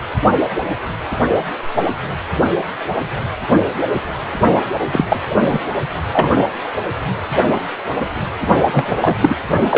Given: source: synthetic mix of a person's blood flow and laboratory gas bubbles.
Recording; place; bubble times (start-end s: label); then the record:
Doppler ultrasound of blood flow; precordium
4.92-5.06 s: bubbles
5.09-5.23 s: bubbles
5.31-5.37 s: bubbles
5.49-5.60 s: bubbles
6.13-6.29 s: bubbles
8.71-8.97 s: bubbles
9.01-9.16 s: bubbles
9.21-9.35 s: bubbles
9.69-9.78 s: bubbles
From the record:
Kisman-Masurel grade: 223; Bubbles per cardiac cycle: several, 3 to 8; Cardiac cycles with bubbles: 10 to 50%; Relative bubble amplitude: loud (0.450 to 0.775); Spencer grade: 2 (many but less than half of the cardiac periods contain bubble signals, singularly or in groups); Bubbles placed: only in the low amplitude regions of the cardiac cycle